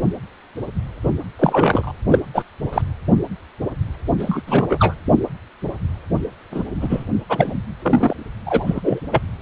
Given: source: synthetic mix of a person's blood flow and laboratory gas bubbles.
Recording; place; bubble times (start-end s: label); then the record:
Doppler ultrasound of blood flow; precordium
1.04-1.12 s: bubbles
1.39-1.92 s: bubbles
2.07-2.19 s: bubbles
2.34-2.43 s: bubbles
2.72-2.82 s: bubbles
4.19-4.42 s: bubbles
4.46-4.94 s: bubbles
6.51-6.63 s: bubbles
6.81-7.06 s: bubbles
7.29-7.54 s: bubbles
7.82-8.13 s: bubbles
8.46-8.80 s: bubbles
8.83-9.00 s: bubbles
9.11-9.21 s: bubbles
From the record:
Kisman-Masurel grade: 233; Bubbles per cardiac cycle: several, 3 to 8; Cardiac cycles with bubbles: 50 to 99%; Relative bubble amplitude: loud (0.450 to 0.775); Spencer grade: 3 (all of the cardiac periods contain showers or single bubble signals, but not dominating or overriding the cardiac motion signals); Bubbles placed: anywhere in the cardiac cycle